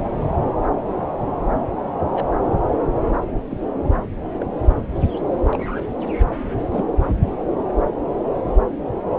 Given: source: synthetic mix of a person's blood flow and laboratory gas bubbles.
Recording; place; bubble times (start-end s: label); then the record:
Doppler ultrasound of blood flow; subclavian vein
2.13-2.26 s: bubbles
3.50-3.58 s: bubbles
4.39-4.46 s: bubbles
5.53-5.83 s: bubbles
6.59-6.63 s: bubbles
6.72-6.86 s: bubbles
From the record:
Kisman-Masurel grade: 121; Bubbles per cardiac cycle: 1 to 2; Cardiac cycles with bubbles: 10 to 50%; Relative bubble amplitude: barely perceptible (0.100 to 0.250); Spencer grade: 2 (many but less than half of the cardiac periods contain bubble signals, singularly or in groups); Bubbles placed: anywhere in the cardiac cycle